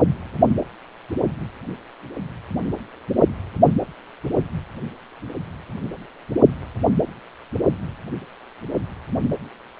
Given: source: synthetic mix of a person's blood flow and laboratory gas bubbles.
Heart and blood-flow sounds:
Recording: Doppler ultrasound of blood flow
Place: precordium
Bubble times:
no bubbles
From the record:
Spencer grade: 0 (complete lack of bubble signals)

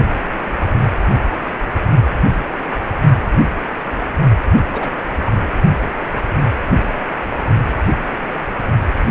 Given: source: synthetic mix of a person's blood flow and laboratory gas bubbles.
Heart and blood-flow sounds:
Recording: Doppler ultrasound of blood flow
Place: precordium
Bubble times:
4.72-4.89 s: bubbles
5.25-5.31 s: bubbles
From the record:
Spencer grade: 1 (occasional bubble signal discernible with the cardiac motion signal, with majority of cardiac periods free of bubbles)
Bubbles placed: only in the low amplitude regions of the cardiac cycle

